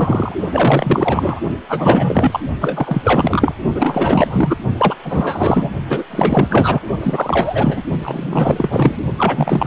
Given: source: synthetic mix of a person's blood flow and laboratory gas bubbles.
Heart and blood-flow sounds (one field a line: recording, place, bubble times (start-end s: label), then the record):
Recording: Doppler ultrasound of blood flow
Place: precordium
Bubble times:
0.00-0.34 s: bubbles
0.52-1.40 s: bubbles
1.68-2.40 s: bubbles
2.61-3.53 s: bubbles
3.75-4.58 s: bubbles
4.78-4.95 s: bubbles
5.03-5.70 s: bubbles
5.89-6.03 s: bubbles
6.10-6.87 s: bubbles
7.01-7.83 s: bubbles
8.03-8.98 s: bubbles
9.17-9.67 s: bubbles
From the record:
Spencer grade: 4 (maximum detectable bubble signal sounding continuously throughout systole and diastole of every cardiac period, and overriding the amplitude of the normal cardiac signals)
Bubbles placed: only in the low amplitude regions of the cardiac cycle